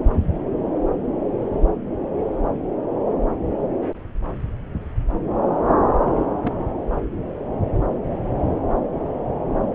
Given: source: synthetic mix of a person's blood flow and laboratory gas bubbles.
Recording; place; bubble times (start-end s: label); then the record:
Doppler ultrasound of blood flow; subclavian vein
6.05-6.11 s: bubbles
6.44-6.52 s: bubbles
From the record:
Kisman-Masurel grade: 112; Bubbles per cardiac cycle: 1 to 2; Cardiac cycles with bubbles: 1 to 10%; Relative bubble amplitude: moderate (0.250 to 0.450); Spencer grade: 1 (occasional bubble signal discernible with the cardiac motion signal, with majority of cardiac periods free of bubbles); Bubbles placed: anywhere in the cardiac cycle